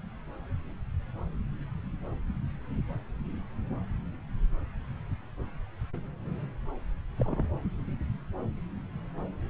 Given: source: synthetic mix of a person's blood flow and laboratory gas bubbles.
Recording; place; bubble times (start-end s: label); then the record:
Doppler ultrasound of blood flow; subclavian vein
7.17-7.49 s: bubbles
From the record:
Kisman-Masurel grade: 111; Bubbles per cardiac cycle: 1 to 2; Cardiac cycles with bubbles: 1 to 10%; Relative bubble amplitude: barely perceptible (0.100 to 0.250); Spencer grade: 1 (occasional bubble signal discernible with the cardiac motion signal, with majority of cardiac periods free of bubbles); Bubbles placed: anywhere in the cardiac cycle